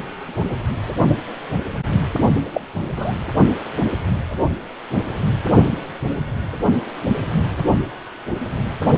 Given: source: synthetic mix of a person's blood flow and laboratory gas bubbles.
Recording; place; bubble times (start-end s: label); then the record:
Doppler ultrasound of blood flow; precordium
2.54-2.61 s: bubbles
2.96-3.13 s: bubbles
From the record:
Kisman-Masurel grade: 123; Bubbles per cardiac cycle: 1 to 2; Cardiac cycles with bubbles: 10 to 50%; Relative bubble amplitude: loud (0.450 to 0.775); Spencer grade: 2 (many but less than half of the cardiac periods contain bubble signals, singularly or in groups); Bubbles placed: anywhere in the cardiac cycle